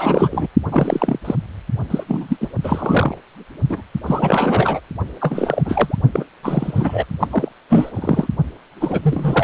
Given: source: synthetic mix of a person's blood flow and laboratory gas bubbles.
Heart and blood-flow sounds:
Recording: Doppler ultrasound of blood flow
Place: precordium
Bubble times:
0.00-0.47 s: bubbles
0.72-1.19 s: bubbles
1.25-1.35 s: bubbles
1.90-2.04 s: bubbles
2.07-2.37 s: bubbles
2.41-2.48 s: bubbles
2.64-3.18 s: bubbles
3.69-3.83 s: bubbles
4.07-4.80 s: bubbles
5.20-5.62 s: bubbles
5.65-5.99 s: bubbles
6.13-6.24 s: bubbles
6.43-7.05 s: bubbles
7.20-7.28 s: bubbles
7.30-7.49 s: bubbles
7.70-7.92 s: bubbles
7.96-8.28 s: bubbles
8.80-9.44 s: bubbles
From the record:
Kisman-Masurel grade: 333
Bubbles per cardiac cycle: rolling drumbeat, 9 or more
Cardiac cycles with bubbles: 50 to 99%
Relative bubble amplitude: loud (0.450 to 0.775)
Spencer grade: 3 (all of the cardiac periods contain showers or single bubble signals, but not dominating or overriding the cardiac motion signals)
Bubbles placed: only in the low amplitude regions of the cardiac cycle

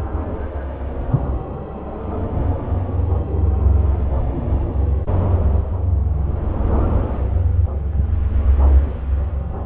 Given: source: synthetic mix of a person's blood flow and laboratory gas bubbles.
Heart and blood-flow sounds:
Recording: Doppler ultrasound of blood flow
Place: subclavian vein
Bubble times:
no bubbles
From the record:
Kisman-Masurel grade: 000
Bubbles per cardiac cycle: 0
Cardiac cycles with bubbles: 0%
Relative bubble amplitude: no bubbles discernible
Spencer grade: 0 (complete lack of bubble signals)

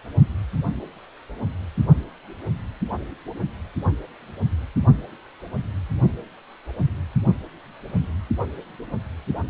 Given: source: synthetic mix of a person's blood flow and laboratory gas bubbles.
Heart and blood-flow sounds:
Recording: Doppler ultrasound of blood flow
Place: precordium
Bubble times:
no bubbles
From the record:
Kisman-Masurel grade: 000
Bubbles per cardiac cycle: 0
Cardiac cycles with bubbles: 0%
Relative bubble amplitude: no bubbles discernible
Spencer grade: 0 (complete lack of bubble signals)

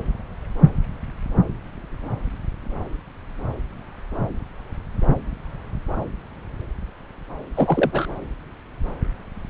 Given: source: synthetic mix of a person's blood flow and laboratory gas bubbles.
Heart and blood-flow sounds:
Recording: Doppler ultrasound of blood flow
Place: subclavian vein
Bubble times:
7.55-8.08 s: bubbles
From the record:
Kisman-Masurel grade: 212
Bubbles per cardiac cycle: several, 3 to 8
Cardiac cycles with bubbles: 1 to 10%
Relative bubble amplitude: moderate (0.250 to 0.450)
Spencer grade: 1 (occasional bubble signal discernible with the cardiac motion signal, with majority of cardiac periods free of bubbles)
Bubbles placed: anywhere in the cardiac cycle

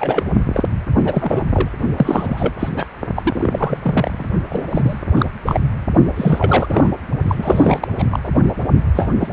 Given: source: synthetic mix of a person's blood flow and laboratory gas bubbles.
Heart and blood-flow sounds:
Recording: Doppler ultrasound of blood flow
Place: precordium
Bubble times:
0.00-0.24 s: bubbles
0.53-0.64 s: bubbles
1.05-1.43 s: bubbles
1.53-1.70 s: bubbles
1.96-2.53 s: bubbles
2.58-2.69 s: bubbles
2.75-2.85 s: bubbles
3.16-4.29 s: bubbles
4.50-4.66 s: bubbles
4.71-4.99 s: bubbles
5.16-5.25 s: bubbles
5.46-5.59 s: bubbles
6.16-6.89 s: bubbles
7.28-7.88 s: bubbles
7.98-8.04 s: bubbles
8.10-8.19 s: bubbles
8.23-8.28 s: bubbles
8.94-9.08 s: bubbles
9.19-9.28 s: bubbles
From the record:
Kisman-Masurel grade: 342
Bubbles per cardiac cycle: rolling drumbeat, 9 or more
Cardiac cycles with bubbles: 100%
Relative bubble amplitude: moderate (0.250 to 0.450)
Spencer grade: 3 (all of the cardiac periods contain showers or single bubble signals, but not dominating or overriding the cardiac motion signals)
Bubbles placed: only in the low amplitude regions of the cardiac cycle

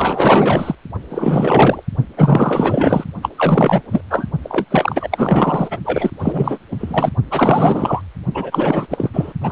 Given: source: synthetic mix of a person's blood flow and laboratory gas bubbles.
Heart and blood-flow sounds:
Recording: Doppler ultrasound of blood flow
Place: precordium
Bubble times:
0.00-0.75 s: bubbles
1.09-1.81 s: bubbles
2.17-3.04 s: bubbles
3.22-3.29 s: bubbles
3.38-3.83 s: bubbles
3.90-4.01 s: bubbles
4.10-4.26 s: bubbles
4.44-4.66 s: bubbles
4.71-5.78 s: bubbles
5.85-6.10 s: bubbles
6.20-6.58 s: bubbles
6.71-7.10 s: bubbles
7.31-8.02 s: bubbles
8.34-8.87 s: bubbles
8.90-9.09 s: bubbles
9.13-9.33 s: bubbles
9.40-9.52 s: bubbles
From the record:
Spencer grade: 4 (maximum detectable bubble signal sounding continuously throughout systole and diastole of every cardiac period, and overriding the amplitude of the normal cardiac signals)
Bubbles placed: only in the low amplitude regions of the cardiac cycle

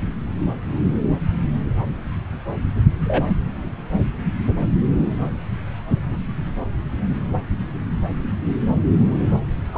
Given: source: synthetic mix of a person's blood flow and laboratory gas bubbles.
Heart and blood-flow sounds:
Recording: Doppler ultrasound of blood flow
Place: subclavian vein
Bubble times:
3.04-3.34 s: bubbles
9.72-9.78 s: bubbles
From the record:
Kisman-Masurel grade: 123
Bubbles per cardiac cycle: 1 to 2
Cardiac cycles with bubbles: 10 to 50%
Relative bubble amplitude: loud (0.450 to 0.775)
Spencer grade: 2 (many but less than half of the cardiac periods contain bubble signals, singularly or in groups)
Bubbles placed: anywhere in the cardiac cycle

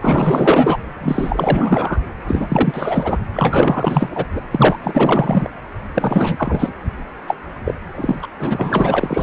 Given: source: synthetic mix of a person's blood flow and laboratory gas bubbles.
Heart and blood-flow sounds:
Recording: Doppler ultrasound of blood flow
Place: precordium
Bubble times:
0.00-0.78 s: bubbles
1.00-2.01 s: bubbles
2.28-3.18 s: bubbles
3.34-4.26 s: bubbles
4.32-4.41 s: bubbles
4.51-4.77 s: bubbles
4.83-5.49 s: bubbles
5.94-6.73 s: bubbles
7.27-7.36 s: bubbles
7.65-7.75 s: bubbles
7.95-8.27 s: bubbles
8.38-9.23 s: bubbles
From the record:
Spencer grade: 4 (maximum detectable bubble signal sounding continuously throughout systole and diastole of every cardiac period, and overriding the amplitude of the normal cardiac signals)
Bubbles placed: anywhere in the cardiac cycle

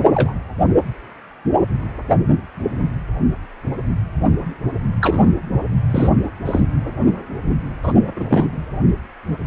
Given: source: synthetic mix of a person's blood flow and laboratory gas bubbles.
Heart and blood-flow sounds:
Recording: Doppler ultrasound of blood flow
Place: precordium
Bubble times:
0.14-0.33 s: bubbles
5.01-5.30 s: bubbles
5.89-6.10 s: bubbles
6.45-6.61 s: bubbles
7.83-8.25 s: bubbles
8.28-8.49 s: bubbles
From the record:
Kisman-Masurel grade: 223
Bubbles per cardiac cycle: several, 3 to 8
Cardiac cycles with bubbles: 10 to 50%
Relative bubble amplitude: loud (0.450 to 0.775)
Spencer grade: 2 (many but less than half of the cardiac periods contain bubble signals, singularly or in groups)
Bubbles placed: anywhere in the cardiac cycle

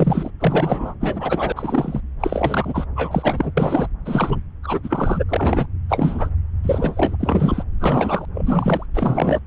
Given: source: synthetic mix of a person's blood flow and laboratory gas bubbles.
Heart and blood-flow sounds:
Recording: Doppler ultrasound of blood flow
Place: subclavian vein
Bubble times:
0.00-0.30 s: bubbles
0.40-0.94 s: bubbles
1.00-1.52 s: bubbles
1.55-2.00 s: bubbles
2.20-2.85 s: bubbles
2.96-3.52 s: bubbles
3.57-3.87 s: bubbles
4.05-4.41 s: bubbles
4.63-4.80 s: bubbles
4.83-5.24 s: bubbles
5.29-5.66 s: bubbles
5.89-6.29 s: bubbles
6.63-7.16 s: bubbles
7.20-7.63 s: bubbles
7.80-8.26 s: bubbles
8.34-8.86 s: bubbles
8.94-9.40 s: bubbles
From the record:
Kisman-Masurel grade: 342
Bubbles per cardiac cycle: rolling drumbeat, 9 or more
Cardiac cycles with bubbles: 100%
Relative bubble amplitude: moderate (0.250 to 0.450)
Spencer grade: 3 (all of the cardiac periods contain showers or single bubble signals, but not dominating or overriding the cardiac motion signals)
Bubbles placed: anywhere in the cardiac cycle

